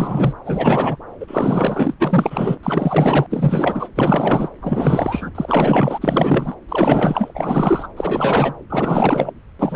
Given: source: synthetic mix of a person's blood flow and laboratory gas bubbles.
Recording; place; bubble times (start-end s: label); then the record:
Doppler ultrasound of blood flow; subclavian vein
0.00-0.33 s: bubbles
0.45-0.97 s: bubbles
1.20-1.94 s: bubbles
2.00-2.58 s: bubbles
2.63-3.27 s: bubbles
3.30-3.88 s: bubbles
3.96-4.49 s: bubbles
4.62-5.30 s: bubbles
5.34-6.54 s: bubbles
6.68-7.32 s: bubbles
7.34-7.88 s: bubbles
7.97-8.54 s: bubbles
8.69-9.31 s: bubbles
9.59-9.76 s: bubbles
From the record:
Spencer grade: 4 (maximum detectable bubble signal sounding continuously throughout systole and diastole of every cardiac period, and overriding the amplitude of the normal cardiac signals); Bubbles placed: anywhere in the cardiac cycle